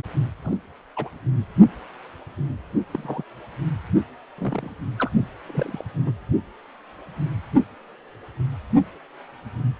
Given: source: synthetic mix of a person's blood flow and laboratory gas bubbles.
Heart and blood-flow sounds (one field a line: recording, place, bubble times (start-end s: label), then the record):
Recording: Doppler ultrasound of blood flow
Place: precordium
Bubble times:
0.42-0.57 s: bubbles
0.95-1.09 s: bubbles
2.92-3.23 s: bubbles
4.38-4.70 s: bubbles
4.98-5.11 s: bubbles
5.46-5.85 s: bubbles
6.06-6.12 s: bubbles
From the record:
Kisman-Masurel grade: 121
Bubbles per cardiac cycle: 1 to 2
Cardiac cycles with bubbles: 10 to 50%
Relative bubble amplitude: barely perceptible (0.100 to 0.250)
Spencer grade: 2 (many but less than half of the cardiac periods contain bubble signals, singularly or in groups)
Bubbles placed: only in the low amplitude regions of the cardiac cycle